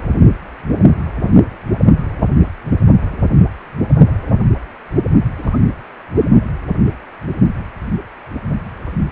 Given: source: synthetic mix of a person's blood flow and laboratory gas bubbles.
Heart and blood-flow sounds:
Doppler ultrasound of blood flow; precordium
5.39-5.59 s: bubbles
From the record:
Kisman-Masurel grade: 111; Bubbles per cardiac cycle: 1 to 2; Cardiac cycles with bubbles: 1 to 10%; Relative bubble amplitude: barely perceptible (0.100 to 0.250); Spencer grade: 1 (occasional bubble signal discernible with the cardiac motion signal, with majority of cardiac periods free of bubbles); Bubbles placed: only in the low amplitude regions of the cardiac cycle

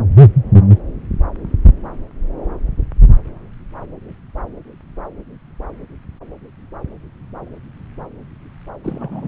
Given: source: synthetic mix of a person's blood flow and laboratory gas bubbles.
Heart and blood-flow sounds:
Doppler ultrasound of blood flow; subclavian vein
8.83-9.28 s: bubbles
From the record:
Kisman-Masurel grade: 211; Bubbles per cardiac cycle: several, 3 to 8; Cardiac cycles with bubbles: 1 to 10%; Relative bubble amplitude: barely perceptible (0.100 to 0.250); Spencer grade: 1 (occasional bubble signal discernible with the cardiac motion signal, with majority of cardiac periods free of bubbles); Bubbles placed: anywhere in the cardiac cycle

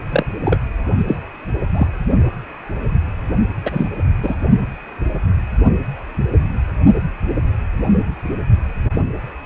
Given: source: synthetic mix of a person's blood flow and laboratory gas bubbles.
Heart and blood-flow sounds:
Doppler ultrasound of blood flow; precordium
0.10-0.26 s: bubbles
0.45-0.57 s: bubbles
1.07-1.18 s: bubbles
1.75-1.87 s: bubbles
3.65-3.88 s: bubbles
4.22-4.35 s: bubbles
From the record:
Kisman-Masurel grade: 223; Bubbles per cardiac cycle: several, 3 to 8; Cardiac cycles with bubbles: 10 to 50%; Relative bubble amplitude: loud (0.450 to 0.775); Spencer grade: 2 (many but less than half of the cardiac periods contain bubble signals, singularly or in groups); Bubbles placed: only in the low amplitude regions of the cardiac cycle

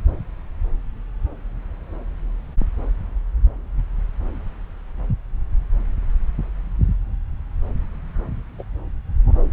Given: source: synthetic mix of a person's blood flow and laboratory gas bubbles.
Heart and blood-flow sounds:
Doppler ultrasound of blood flow; subclavian vein
8.58-8.62 s: bubbles
From the record:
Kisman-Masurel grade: 111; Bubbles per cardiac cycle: 1 to 2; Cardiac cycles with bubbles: 1 to 10%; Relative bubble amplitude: barely perceptible (0.100 to 0.250); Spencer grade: 1 (occasional bubble signal discernible with the cardiac motion signal, with majority of cardiac periods free of bubbles); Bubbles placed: anywhere in the cardiac cycle

